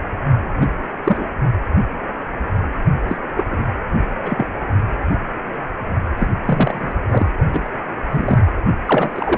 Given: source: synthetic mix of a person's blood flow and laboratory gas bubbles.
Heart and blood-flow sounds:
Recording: Doppler ultrasound of blood flow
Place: precordium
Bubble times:
0.60-0.67 s: bubbles
1.04-1.27 s: bubbles
3.08-3.17 s: bubbles
3.36-3.45 s: bubbles
3.51-3.64 s: bubbles
4.19-4.45 s: bubbles
6.17-6.27 s: bubbles
6.45-6.92 s: bubbles
7.10-7.29 s: bubbles
7.53-7.69 s: bubbles
8.09-8.43 s: bubbles
8.85-9.38 s: bubbles
From the record:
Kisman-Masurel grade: 233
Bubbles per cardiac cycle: several, 3 to 8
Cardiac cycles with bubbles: 50 to 99%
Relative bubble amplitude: loud (0.450 to 0.775)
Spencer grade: 3 (all of the cardiac periods contain showers or single bubble signals, but not dominating or overriding the cardiac motion signals)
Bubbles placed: only in the low amplitude regions of the cardiac cycle

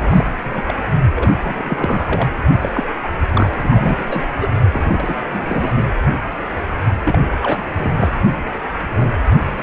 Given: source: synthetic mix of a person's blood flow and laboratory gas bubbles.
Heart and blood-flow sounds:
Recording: Doppler ultrasound of blood flow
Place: precordium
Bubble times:
0.00-0.31 s: bubbles
0.45-0.61 s: bubbles
0.66-0.74 s: bubbles
1.15-1.34 s: bubbles
1.40-2.30 s: bubbles
2.61-2.69 s: bubbles
2.73-2.83 s: bubbles
3.03-3.08 s: bubbles
3.31-3.54 s: bubbles
3.64-4.05 s: bubbles
4.10-4.25 s: bubbles
4.39-4.49 s: bubbles
4.72-5.17 s: bubbles
5.29-5.83 s: bubbles
7.04-7.20 s: bubbles
7.42-7.67 s: bubbles
7.73-7.93 s: bubbles
7.96-8.15 s: bubbles
8.81-9.10 s: bubbles
9.57-9.63 s: bubbles
From the record:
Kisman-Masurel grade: 332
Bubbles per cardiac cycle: rolling drumbeat, 9 or more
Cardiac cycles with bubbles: 50 to 99%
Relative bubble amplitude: moderate (0.250 to 0.450)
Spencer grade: 3 (all of the cardiac periods contain showers or single bubble signals, but not dominating or overriding the cardiac motion signals)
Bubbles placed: anywhere in the cardiac cycle

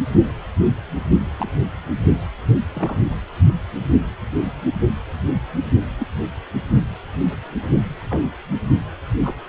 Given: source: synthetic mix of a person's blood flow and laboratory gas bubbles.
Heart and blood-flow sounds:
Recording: Doppler ultrasound of blood flow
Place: precordium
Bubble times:
1.39-1.52 s: bubbles
2.75-2.95 s: bubbles
5.97-6.06 s: bubbles
8.10-8.31 s: bubbles
9.21-9.35 s: bubbles
From the record:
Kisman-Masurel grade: 121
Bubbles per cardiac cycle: 1 to 2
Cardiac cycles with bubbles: 10 to 50%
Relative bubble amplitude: barely perceptible (0.100 to 0.250)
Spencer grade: 2 (many but less than half of the cardiac periods contain bubble signals, singularly or in groups)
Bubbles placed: only in the low amplitude regions of the cardiac cycle

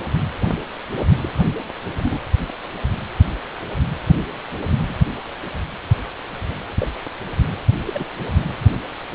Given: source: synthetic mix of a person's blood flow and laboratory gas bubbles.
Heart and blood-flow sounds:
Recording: Doppler ultrasound of blood flow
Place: precordium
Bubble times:
1.22-1.29 s: bubbles
2.02-2.19 s: bubbles
4.88-5.34 s: bubbles
6.79-6.86 s: bubbles
7.86-8.04 s: bubbles
From the record:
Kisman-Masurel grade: 121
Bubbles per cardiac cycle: 1 to 2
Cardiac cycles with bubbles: 10 to 50%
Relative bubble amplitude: barely perceptible (0.100 to 0.250)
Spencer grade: 2 (many but less than half of the cardiac periods contain bubble signals, singularly or in groups)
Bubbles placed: anywhere in the cardiac cycle

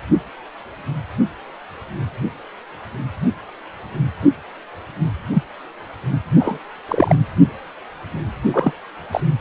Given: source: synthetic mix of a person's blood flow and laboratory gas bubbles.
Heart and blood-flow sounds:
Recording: Doppler ultrasound of blood flow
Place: precordium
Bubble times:
5.33-5.42 s: bubbles
6.39-6.58 s: bubbles
6.88-7.16 s: bubbles
8.53-8.72 s: bubbles
9.12-9.21 s: bubbles
From the record:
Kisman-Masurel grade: 123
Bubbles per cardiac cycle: 1 to 2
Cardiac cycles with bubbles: 10 to 50%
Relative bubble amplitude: loud (0.450 to 0.775)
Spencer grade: 2 (many but less than half of the cardiac periods contain bubble signals, singularly or in groups)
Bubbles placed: anywhere in the cardiac cycle

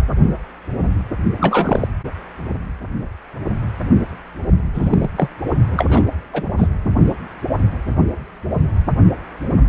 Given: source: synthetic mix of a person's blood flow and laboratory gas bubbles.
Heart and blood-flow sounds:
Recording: Doppler ultrasound of blood flow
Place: precordium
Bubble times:
1.38-1.88 s: bubbles
4.73-5.10 s: bubbles
5.16-5.29 s: bubbles
5.70-5.86 s: bubbles
5.88-6.03 s: bubbles
6.33-6.42 s: bubbles
6.57-6.67 s: bubbles
From the record:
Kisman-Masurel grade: 222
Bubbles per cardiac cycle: several, 3 to 8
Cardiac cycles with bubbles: 10 to 50%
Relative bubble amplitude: moderate (0.250 to 0.450)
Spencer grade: 2 (many but less than half of the cardiac periods contain bubble signals, singularly or in groups)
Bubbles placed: only in the low amplitude regions of the cardiac cycle

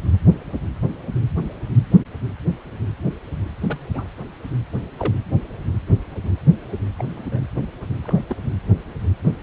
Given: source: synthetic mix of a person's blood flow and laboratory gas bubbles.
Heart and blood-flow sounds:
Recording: Doppler ultrasound of blood flow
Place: precordium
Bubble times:
3.67-3.80 s: bubbles
3.94-4.07 s: bubbles
4.98-5.14 s: bubbles
6.99-7.05 s: bubbles
7.14-7.40 s: bubbles
8.04-8.19 s: bubbles
8.28-8.36 s: bubbles
9.23-9.28 s: bubbles
From the record:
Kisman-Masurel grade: 121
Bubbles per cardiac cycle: 1 to 2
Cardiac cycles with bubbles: 10 to 50%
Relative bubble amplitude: barely perceptible (0.100 to 0.250)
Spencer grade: 2 (many but less than half of the cardiac periods contain bubble signals, singularly or in groups)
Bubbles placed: anywhere in the cardiac cycle

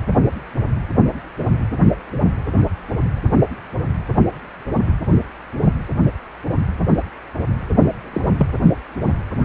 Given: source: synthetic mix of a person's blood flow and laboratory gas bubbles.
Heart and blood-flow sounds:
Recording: Doppler ultrasound of blood flow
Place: precordium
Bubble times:
8.12-8.21 s: bubbles
8.38-8.48 s: bubbles
From the record:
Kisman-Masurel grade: 112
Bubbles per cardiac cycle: 1 to 2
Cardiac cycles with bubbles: 1 to 10%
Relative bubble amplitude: moderate (0.250 to 0.450)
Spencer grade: 1 (occasional bubble signal discernible with the cardiac motion signal, with majority of cardiac periods free of bubbles)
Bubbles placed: anywhere in the cardiac cycle

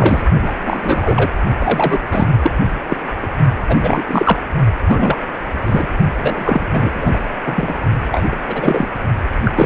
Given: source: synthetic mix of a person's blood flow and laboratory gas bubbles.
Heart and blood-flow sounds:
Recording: Doppler ultrasound of blood flow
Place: precordium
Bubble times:
0.00-0.23 s: bubbles
0.41-0.53 s: bubbles
0.63-1.29 s: bubbles
1.58-1.98 s: bubbles
2.11-2.27 s: bubbles
2.42-2.52 s: bubbles
2.90-2.96 s: bubbles
3.22-3.27 s: bubbles
3.68-3.77 s: bubbles
3.81-4.05 s: bubbles
4.08-4.39 s: bubbles
4.88-5.22 s: bubbles
5.62-5.87 s: bubbles
6.22-6.66 s: bubbles
6.72-6.91 s: bubbles
6.93-7.18 s: bubbles
7.45-7.76 s: bubbles
8.11-8.27 s: bubbles
8.31-8.36 s: bubbles
8.47-8.86 s: bubbles
9.45-9.53 s: bubbles
9.55-9.66 s: bubbles
From the record:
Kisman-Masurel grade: 343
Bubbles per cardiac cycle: rolling drumbeat, 9 or more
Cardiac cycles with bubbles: 100%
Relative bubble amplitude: loud (0.450 to 0.775)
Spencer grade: 3 (all of the cardiac periods contain showers or single bubble signals, but not dominating or overriding the cardiac motion signals)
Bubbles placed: only in the low amplitude regions of the cardiac cycle

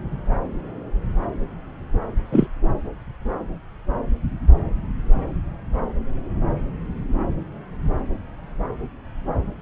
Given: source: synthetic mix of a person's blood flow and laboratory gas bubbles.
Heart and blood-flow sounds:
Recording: Doppler ultrasound of blood flow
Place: subclavian vein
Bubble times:
2.32-2.47 s: bubbles
From the record:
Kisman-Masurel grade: 113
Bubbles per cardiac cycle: 1 to 2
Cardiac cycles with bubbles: 1 to 10%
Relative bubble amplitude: loud (0.450 to 0.775)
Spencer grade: 1 (occasional bubble signal discernible with the cardiac motion signal, with majority of cardiac periods free of bubbles)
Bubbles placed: anywhere in the cardiac cycle

